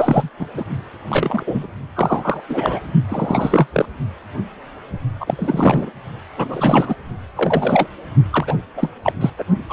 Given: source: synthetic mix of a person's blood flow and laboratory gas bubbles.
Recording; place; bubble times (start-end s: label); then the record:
Doppler ultrasound of blood flow; precordium
0.00-0.29 s: bubbles
0.39-0.46 s: bubbles
0.54-0.64 s: bubbles
1.08-1.43 s: bubbles
1.47-1.67 s: bubbles
1.95-2.41 s: bubbles
2.49-2.80 s: bubbles
3.08-3.67 s: bubbles
3.73-3.86 s: bubbles
5.20-5.91 s: bubbles
6.37-6.95 s: bubbles
7.36-7.88 s: bubbles
8.30-8.56 s: bubbles
8.77-8.89 s: bubbles
9.03-9.13 s: bubbles
9.21-9.30 s: bubbles
9.38-9.44 s: bubbles
9.69-9.73 s: bubbles
From the record:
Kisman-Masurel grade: 233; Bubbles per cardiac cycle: several, 3 to 8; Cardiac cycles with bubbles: 50 to 99%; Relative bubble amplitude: loud (0.450 to 0.775); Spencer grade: 3 (all of the cardiac periods contain showers or single bubble signals, but not dominating or overriding the cardiac motion signals); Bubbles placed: only in the low amplitude regions of the cardiac cycle